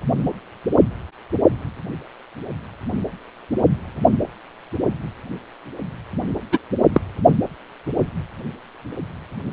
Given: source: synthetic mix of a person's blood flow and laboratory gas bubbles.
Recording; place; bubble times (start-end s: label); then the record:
Doppler ultrasound of blood flow; precordium
6.52-6.58 s: bubbles
6.93-7.01 s: bubbles
From the record:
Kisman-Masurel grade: 123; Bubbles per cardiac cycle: 1 to 2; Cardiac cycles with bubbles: 10 to 50%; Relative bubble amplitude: loud (0.450 to 0.775); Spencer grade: 2 (many but less than half of the cardiac periods contain bubble signals, singularly or in groups); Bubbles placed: only in the low amplitude regions of the cardiac cycle